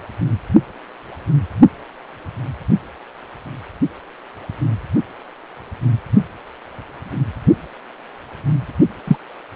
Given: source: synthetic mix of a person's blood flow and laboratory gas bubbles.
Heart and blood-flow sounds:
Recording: Doppler ultrasound of blood flow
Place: precordium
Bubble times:
9.07-9.16 s: bubbles
From the record:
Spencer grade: 1 (occasional bubble signal discernible with the cardiac motion signal, with majority of cardiac periods free of bubbles)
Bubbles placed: only in the low amplitude regions of the cardiac cycle

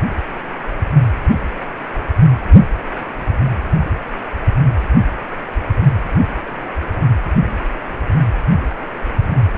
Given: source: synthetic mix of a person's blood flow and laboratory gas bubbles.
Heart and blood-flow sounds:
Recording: Doppler ultrasound of blood flow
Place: precordium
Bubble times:
6.46-6.75 s: bubbles
From the record:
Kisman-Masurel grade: 111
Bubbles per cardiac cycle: 1 to 2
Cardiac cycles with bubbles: 1 to 10%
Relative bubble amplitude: barely perceptible (0.100 to 0.250)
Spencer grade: 1 (occasional bubble signal discernible with the cardiac motion signal, with majority of cardiac periods free of bubbles)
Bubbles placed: anywhere in the cardiac cycle

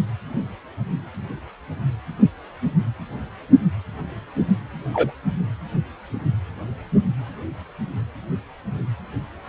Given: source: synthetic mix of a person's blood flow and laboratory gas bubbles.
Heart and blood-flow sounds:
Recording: Doppler ultrasound of blood flow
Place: precordium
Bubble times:
4.93-5.11 s: bubbles
From the record:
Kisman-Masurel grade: 122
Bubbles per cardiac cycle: 1 to 2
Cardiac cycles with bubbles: 10 to 50%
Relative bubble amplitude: moderate (0.250 to 0.450)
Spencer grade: 2 (many but less than half of the cardiac periods contain bubble signals, singularly or in groups)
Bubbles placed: anywhere in the cardiac cycle

